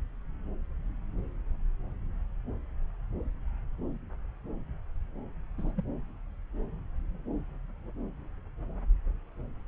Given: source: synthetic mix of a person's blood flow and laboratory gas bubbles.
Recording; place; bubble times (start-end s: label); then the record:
Doppler ultrasound of blood flow; subclavian vein
5.58-5.74 s: bubbles
5.77-5.83 s: bubbles
From the record:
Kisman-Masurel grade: 111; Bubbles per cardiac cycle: 1 to 2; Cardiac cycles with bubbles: 1 to 10%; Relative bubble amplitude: barely perceptible (0.100 to 0.250); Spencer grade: 1 (occasional bubble signal discernible with the cardiac motion signal, with majority of cardiac periods free of bubbles); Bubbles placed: anywhere in the cardiac cycle